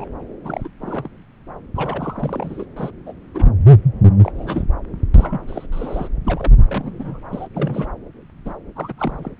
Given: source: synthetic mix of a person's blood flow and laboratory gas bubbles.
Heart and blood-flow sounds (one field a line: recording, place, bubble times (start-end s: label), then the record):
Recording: Doppler ultrasound of blood flow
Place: subclavian vein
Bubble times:
0.00-0.08 s: bubbles
0.44-0.68 s: bubbles
0.79-1.09 s: bubbles
1.75-2.65 s: bubbles
2.76-2.90 s: bubbles
3.06-3.12 s: bubbles
3.34-3.47 s: bubbles
4.23-4.32 s: bubbles
4.35-4.65 s: bubbles
5.14-5.41 s: bubbles
5.47-5.67 s: bubbles
5.72-6.08 s: bubbles
6.24-6.53 s: bubbles
6.66-7.23 s: bubbles
7.32-7.48 s: bubbles
7.54-7.90 s: bubbles
8.45-8.54 s: bubbles
8.75-8.93 s: bubbles
8.97-9.31 s: bubbles
From the record:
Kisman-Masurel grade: 242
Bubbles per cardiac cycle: several, 3 to 8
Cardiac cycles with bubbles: 100%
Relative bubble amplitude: moderate (0.250 to 0.450)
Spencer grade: 3 (all of the cardiac periods contain showers or single bubble signals, but not dominating or overriding the cardiac motion signals)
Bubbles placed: anywhere in the cardiac cycle